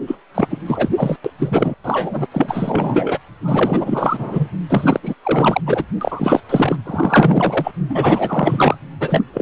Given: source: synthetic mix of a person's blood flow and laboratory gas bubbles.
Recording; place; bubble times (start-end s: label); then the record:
Doppler ultrasound of blood flow; precordium
0.07-0.16 s: bubbles
0.34-0.47 s: bubbles
0.50-0.59 s: bubbles
0.66-0.89 s: bubbles
0.96-1.17 s: bubbles
1.25-1.31 s: bubbles
1.39-1.75 s: bubbles
1.84-2.26 s: bubbles
2.31-3.19 s: bubbles
3.41-4.49 s: bubbles
4.69-5.00 s: bubbles
5.02-5.14 s: bubbles
5.23-5.61 s: bubbles
5.65-5.84 s: bubbles
6.01-6.40 s: bubbles
6.49-6.76 s: bubbles
6.84-7.72 s: bubbles
7.89-8.76 s: bubbles
9.00-9.24 s: bubbles
9.34-9.42 s: bubbles
From the record:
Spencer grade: 4 (maximum detectable bubble signal sounding continuously throughout systole and diastole of every cardiac period, and overriding the amplitude of the normal cardiac signals); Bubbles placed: anywhere in the cardiac cycle